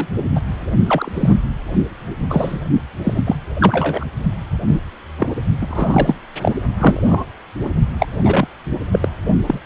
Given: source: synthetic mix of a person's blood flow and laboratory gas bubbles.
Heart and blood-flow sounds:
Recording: Doppler ultrasound of blood flow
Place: precordium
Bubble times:
0.00-0.07 s: bubbles
0.35-0.41 s: bubbles
0.86-1.35 s: bubbles
2.30-2.60 s: bubbles
3.04-3.35 s: bubbles
3.60-4.06 s: bubbles
4.67-4.80 s: bubbles
5.17-5.36 s: bubbles
5.61-6.17 s: bubbles
6.41-6.56 s: bubbles
6.81-7.24 s: bubbles
7.64-7.69 s: bubbles
8.00-8.07 s: bubbles
8.23-8.46 s: bubbles
8.92-9.08 s: bubbles
9.46-9.60 s: bubbles
From the record:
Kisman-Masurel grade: 243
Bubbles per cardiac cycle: several, 3 to 8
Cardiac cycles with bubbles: 100%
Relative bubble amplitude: loud (0.450 to 0.775)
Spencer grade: 3 (all of the cardiac periods contain showers or single bubble signals, but not dominating or overriding the cardiac motion signals)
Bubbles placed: only in the low amplitude regions of the cardiac cycle

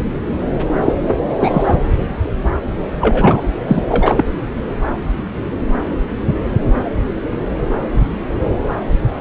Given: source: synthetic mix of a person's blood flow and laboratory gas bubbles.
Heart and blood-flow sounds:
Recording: Doppler ultrasound of blood flow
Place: subclavian vein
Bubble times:
0.85-0.94 s: bubbles
1.39-1.75 s: bubbles
2.99-3.42 s: bubbles
3.67-3.83 s: bubbles
3.88-4.23 s: bubbles
From the record:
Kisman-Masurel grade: 223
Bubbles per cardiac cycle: several, 3 to 8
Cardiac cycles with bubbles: 10 to 50%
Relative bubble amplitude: loud (0.450 to 0.775)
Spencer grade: 2 (many but less than half of the cardiac periods contain bubble signals, singularly or in groups)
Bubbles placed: anywhere in the cardiac cycle

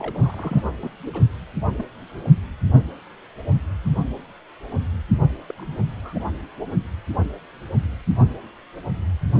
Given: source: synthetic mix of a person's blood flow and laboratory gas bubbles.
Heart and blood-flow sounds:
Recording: Doppler ultrasound of blood flow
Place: precordium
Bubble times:
0.00-0.63 s: bubbles
0.80-0.90 s: bubbles
1.13-1.21 s: bubbles
1.77-1.83 s: bubbles
5.50-5.52 s: bubbles
5.56-5.77 s: bubbles
6.01-6.25 s: bubbles
From the record:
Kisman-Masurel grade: 221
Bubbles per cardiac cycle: several, 3 to 8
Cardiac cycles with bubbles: 10 to 50%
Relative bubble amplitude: barely perceptible (0.100 to 0.250)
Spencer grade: 2 (many but less than half of the cardiac periods contain bubble signals, singularly or in groups)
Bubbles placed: only in the low amplitude regions of the cardiac cycle

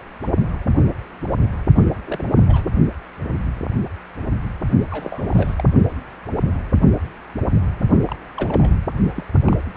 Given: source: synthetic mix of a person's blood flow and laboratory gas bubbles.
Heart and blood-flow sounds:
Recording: Doppler ultrasound of blood flow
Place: precordium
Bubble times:
1.76-1.85 s: bubbles
2.06-2.25 s: bubbles
2.35-2.41 s: bubbles
2.47-2.69 s: bubbles
4.90-5.54 s: bubbles
5.58-5.63 s: bubbles
8.07-8.16 s: bubbles
8.37-8.71 s: bubbles
9.16-9.24 s: bubbles
9.45-9.57 s: bubbles
9.75-9.77 s: bubbles
From the record:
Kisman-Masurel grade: 221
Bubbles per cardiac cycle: several, 3 to 8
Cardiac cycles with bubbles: 10 to 50%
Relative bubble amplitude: barely perceptible (0.100 to 0.250)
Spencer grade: 2 (many but less than half of the cardiac periods contain bubble signals, singularly or in groups)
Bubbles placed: only in the low amplitude regions of the cardiac cycle

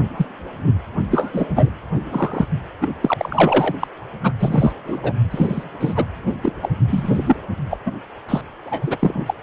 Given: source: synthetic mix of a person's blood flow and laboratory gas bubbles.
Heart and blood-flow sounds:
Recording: Doppler ultrasound of blood flow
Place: precordium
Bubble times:
0.17-0.26 s: bubbles
1.10-1.69 s: bubbles
2.12-2.46 s: bubbles
2.80-2.88 s: bubbles
3.02-3.13 s: bubbles
3.17-3.75 s: bubbles
3.79-3.88 s: bubbles
4.24-4.32 s: bubbles
4.39-4.72 s: bubbles
4.87-5.00 s: bubbles
5.03-5.12 s: bubbles
5.30-5.64 s: bubbles
5.80-6.04 s: bubbles
6.42-6.52 s: bubbles
6.62-6.70 s: bubbles
6.87-7.36 s: bubbles
7.70-7.78 s: bubbles
7.85-7.92 s: bubbles
8.29-8.42 s: bubbles
8.66-8.97 s: bubbles
9.00-9.34 s: bubbles
From the record:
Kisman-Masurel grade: 242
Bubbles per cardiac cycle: several, 3 to 8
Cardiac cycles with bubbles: 100%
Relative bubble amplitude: moderate (0.250 to 0.450)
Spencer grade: 3 (all of the cardiac periods contain showers or single bubble signals, but not dominating or overriding the cardiac motion signals)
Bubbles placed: anywhere in the cardiac cycle

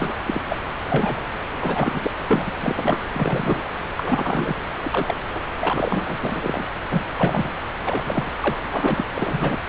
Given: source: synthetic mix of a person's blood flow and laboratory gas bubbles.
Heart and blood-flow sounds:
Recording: Doppler ultrasound of blood flow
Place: subclavian vein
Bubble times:
0.00-0.16 s: bubbles
0.27-0.42 s: bubbles
0.48-0.56 s: bubbles
0.84-1.21 s: bubbles
1.60-2.10 s: bubbles
2.28-2.52 s: bubbles
2.61-3.05 s: bubbles
3.14-3.62 s: bubbles
3.97-4.54 s: bubbles
4.82-5.17 s: bubbles
5.30-5.44 s: bubbles
5.59-6.17 s: bubbles
6.23-6.64 s: bubbles
6.90-7.04 s: bubbles
7.13-7.50 s: bubbles
7.85-8.02 s: bubbles
8.04-8.30 s: bubbles
8.40-8.58 s: bubbles
8.70-9.05 s: bubbles
9.17-9.57 s: bubbles
From the record:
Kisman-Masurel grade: 243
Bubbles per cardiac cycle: several, 3 to 8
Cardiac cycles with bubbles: 100%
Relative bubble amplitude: loud (0.450 to 0.775)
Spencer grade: 3 (all of the cardiac periods contain showers or single bubble signals, but not dominating or overriding the cardiac motion signals)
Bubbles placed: anywhere in the cardiac cycle

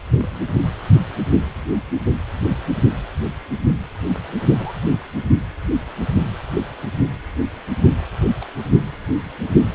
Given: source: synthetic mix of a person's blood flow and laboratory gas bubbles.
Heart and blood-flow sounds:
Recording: Doppler ultrasound of blood flow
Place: precordium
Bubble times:
0.18-0.41 s: bubbles
4.57-4.74 s: bubbles
8.40-8.45 s: bubbles
From the record:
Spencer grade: 2 (many but less than half of the cardiac periods contain bubble signals, singularly or in groups)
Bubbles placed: only in the low amplitude regions of the cardiac cycle

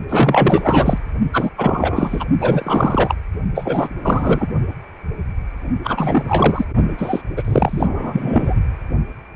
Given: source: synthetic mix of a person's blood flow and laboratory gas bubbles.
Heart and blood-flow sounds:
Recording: Doppler ultrasound of blood flow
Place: precordium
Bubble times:
0.09-0.98 s: bubbles
1.32-1.50 s: bubbles
1.57-2.25 s: bubbles
2.40-3.15 s: bubbles
3.55-3.88 s: bubbles
4.03-4.48 s: bubbles
5.84-6.65 s: bubbles
6.97-7.22 s: bubbles
7.37-8.54 s: bubbles
From the record:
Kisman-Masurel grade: 333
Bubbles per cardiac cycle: rolling drumbeat, 9 or more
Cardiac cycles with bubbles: 50 to 99%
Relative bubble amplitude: loud (0.450 to 0.775)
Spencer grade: 3 (all of the cardiac periods contain showers or single bubble signals, but not dominating or overriding the cardiac motion signals)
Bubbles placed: only in the low amplitude regions of the cardiac cycle

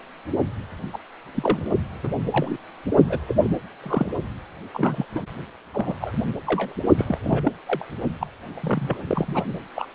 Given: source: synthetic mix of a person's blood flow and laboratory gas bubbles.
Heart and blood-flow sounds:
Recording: Doppler ultrasound of blood flow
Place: precordium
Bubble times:
0.93-0.98 s: bubbles
1.34-1.67 s: bubbles
2.03-2.12 s: bubbles
2.31-2.57 s: bubbles
3.09-3.19 s: bubbles
3.27-3.35 s: bubbles
3.44-3.49 s: bubbles
3.83-4.12 s: bubbles
4.74-5.05 s: bubbles
5.15-5.21 s: bubbles
5.74-5.95 s: bubbles
6.01-6.12 s: bubbles
6.46-6.73 s: bubbles
6.97-7.18 s: bubbles
7.24-7.53 s: bubbles
7.67-7.85 s: bubbles
8.21-8.27 s: bubbles
8.54-8.60 s: bubbles
8.62-8.97 s: bubbles
9.07-9.44 s: bubbles
9.76-9.87 s: bubbles
From the record:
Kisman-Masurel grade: 242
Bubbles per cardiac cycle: several, 3 to 8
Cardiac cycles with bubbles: 100%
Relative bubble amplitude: moderate (0.250 to 0.450)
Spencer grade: 3 (all of the cardiac periods contain showers or single bubble signals, but not dominating or overriding the cardiac motion signals)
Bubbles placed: only in the low amplitude regions of the cardiac cycle

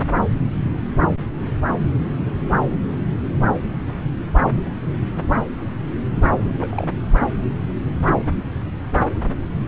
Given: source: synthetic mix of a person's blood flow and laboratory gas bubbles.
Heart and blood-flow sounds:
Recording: Doppler ultrasound of blood flow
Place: subclavian vein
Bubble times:
6.30-6.86 s: bubbles
From the record:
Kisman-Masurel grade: 211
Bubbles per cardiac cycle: several, 3 to 8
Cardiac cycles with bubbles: 1 to 10%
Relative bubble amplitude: barely perceptible (0.100 to 0.250)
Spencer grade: 1 (occasional bubble signal discernible with the cardiac motion signal, with majority of cardiac periods free of bubbles)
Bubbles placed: anywhere in the cardiac cycle

